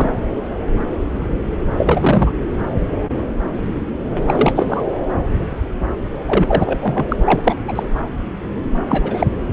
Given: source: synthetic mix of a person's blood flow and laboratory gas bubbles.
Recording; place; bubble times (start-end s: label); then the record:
Doppler ultrasound of blood flow; subclavian vein
0.00-0.11 s: bubbles
1.77-2.31 s: bubbles
4.27-4.84 s: bubbles
6.25-7.05 s: bubbles
7.08-7.16 s: bubbles
7.21-7.41 s: bubbles
7.43-7.57 s: bubbles
7.67-7.83 s: bubbles
8.86-9.27 s: bubbles
From the record:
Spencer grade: 3 (all of the cardiac periods contain showers or single bubble signals, but not dominating or overriding the cardiac motion signals); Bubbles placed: anywhere in the cardiac cycle